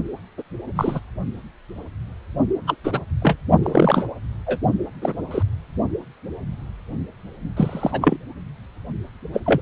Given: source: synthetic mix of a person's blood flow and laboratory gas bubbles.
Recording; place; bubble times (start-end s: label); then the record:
Doppler ultrasound of blood flow; precordium
0.38-0.42 s: bubbles
0.76-1.00 s: bubbles
2.67-2.77 s: bubbles
2.84-3.00 s: bubbles
3.22-3.37 s: bubbles
3.62-4.05 s: bubbles
4.46-4.58 s: bubbles
5.01-5.13 s: bubbles
5.30-5.42 s: bubbles
7.56-8.16 s: bubbles
9.33-9.40 s: bubbles
9.46-9.61 s: bubbles
From the record:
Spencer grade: 3 (all of the cardiac periods contain showers or single bubble signals, but not dominating or overriding the cardiac motion signals); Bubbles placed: only in the low amplitude regions of the cardiac cycle